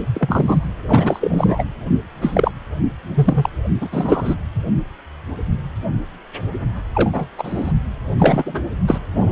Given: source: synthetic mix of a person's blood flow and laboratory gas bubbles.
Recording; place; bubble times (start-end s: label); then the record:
Doppler ultrasound of blood flow; precordium
0.14-0.68 s: bubbles
0.88-1.64 s: bubbles
2.21-2.52 s: bubbles
3.15-3.50 s: bubbles
3.81-3.89 s: bubbles
3.92-4.35 s: bubbles
6.94-7.26 s: bubbles
7.38-7.72 s: bubbles
8.18-8.65 s: bubbles
8.88-8.98 s: bubbles
9.15-9.32 s: bubbles
From the record:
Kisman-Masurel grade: 233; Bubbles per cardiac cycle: several, 3 to 8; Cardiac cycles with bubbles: 50 to 99%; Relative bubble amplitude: loud (0.450 to 0.775); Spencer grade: 3 (all of the cardiac periods contain showers or single bubble signals, but not dominating or overriding the cardiac motion signals); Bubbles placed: anywhere in the cardiac cycle